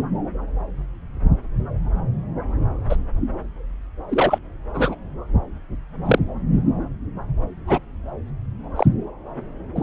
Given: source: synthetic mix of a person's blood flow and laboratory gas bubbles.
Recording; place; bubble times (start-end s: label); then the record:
Doppler ultrasound of blood flow; subclavian vein
2.89-2.97 s: bubbles
4.09-4.38 s: bubbles
4.73-4.96 s: bubbles
6.05-6.18 s: bubbles
7.67-7.79 s: bubbles
8.76-8.87 s: bubbles
9.75-9.83 s: bubbles
From the record:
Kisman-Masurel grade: 123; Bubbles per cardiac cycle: 1 to 2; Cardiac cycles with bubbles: 10 to 50%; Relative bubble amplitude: loud (0.450 to 0.775); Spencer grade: 2 (many but less than half of the cardiac periods contain bubble signals, singularly or in groups); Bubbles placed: anywhere in the cardiac cycle